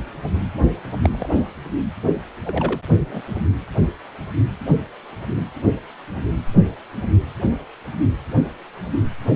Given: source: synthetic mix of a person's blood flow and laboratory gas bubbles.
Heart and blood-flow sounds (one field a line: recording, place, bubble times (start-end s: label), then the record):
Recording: Doppler ultrasound of blood flow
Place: precordium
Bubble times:
1.03-1.27 s: bubbles
2.44-2.81 s: bubbles
2.98-3.22 s: bubbles
From the record:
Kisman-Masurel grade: 122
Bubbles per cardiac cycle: 1 to 2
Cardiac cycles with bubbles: 10 to 50%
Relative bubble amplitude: moderate (0.250 to 0.450)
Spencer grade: 2 (many but less than half of the cardiac periods contain bubble signals, singularly or in groups)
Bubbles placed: anywhere in the cardiac cycle